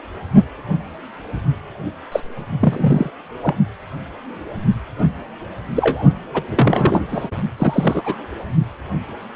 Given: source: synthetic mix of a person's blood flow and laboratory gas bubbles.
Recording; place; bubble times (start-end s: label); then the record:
Doppler ultrasound of blood flow; precordium
2.11-2.21 s: bubbles
2.59-3.10 s: bubbles
3.42-3.54 s: bubbles
4.98-5.05 s: bubbles
5.75-6.04 s: bubbles
6.33-6.42 s: bubbles
6.49-7.01 s: bubbles
7.09-7.28 s: bubbles
7.58-8.16 s: bubbles
From the record:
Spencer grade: 2 (many but less than half of the cardiac periods contain bubble signals, singularly or in groups); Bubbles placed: only in the low amplitude regions of the cardiac cycle